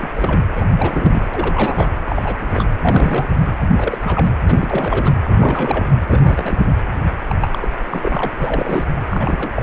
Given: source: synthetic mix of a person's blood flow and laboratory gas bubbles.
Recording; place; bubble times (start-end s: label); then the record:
Doppler ultrasound of blood flow; precordium
0.00-0.10 s: bubbles
0.15-0.41 s: bubbles
0.56-0.65 s: bubbles
0.71-1.26 s: bubbles
1.33-1.88 s: bubbles
2.07-2.35 s: bubbles
2.40-2.67 s: bubbles
2.81-3.27 s: bubbles
3.29-3.37 s: bubbles
3.70-4.34 s: bubbles
4.48-5.14 s: bubbles
5.28-5.85 s: bubbles
6.08-6.62 s: bubbles
7.27-7.36 s: bubbles
7.41-7.68 s: bubbles
7.86-8.29 s: bubbles
8.36-8.84 s: bubbles
9.10-9.51 s: bubbles
9.55-9.63 s: bubbles
From the record:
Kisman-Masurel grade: 342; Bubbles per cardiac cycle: rolling drumbeat, 9 or more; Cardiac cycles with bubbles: 100%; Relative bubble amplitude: moderate (0.250 to 0.450); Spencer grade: 3 (all of the cardiac periods contain showers or single bubble signals, but not dominating or overriding the cardiac motion signals); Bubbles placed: anywhere in the cardiac cycle